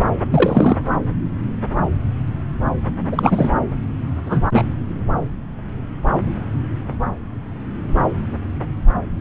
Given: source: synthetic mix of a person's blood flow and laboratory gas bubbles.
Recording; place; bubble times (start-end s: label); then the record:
Doppler ultrasound of blood flow; subclavian vein
0.30-0.78 s: bubbles
3.12-3.50 s: bubbles
4.26-4.47 s: bubbles
4.51-4.63 s: bubbles
From the record:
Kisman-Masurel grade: 223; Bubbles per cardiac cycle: several, 3 to 8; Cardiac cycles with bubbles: 10 to 50%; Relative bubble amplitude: loud (0.450 to 0.775); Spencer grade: 2 (many but less than half of the cardiac periods contain bubble signals, singularly or in groups); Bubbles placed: anywhere in the cardiac cycle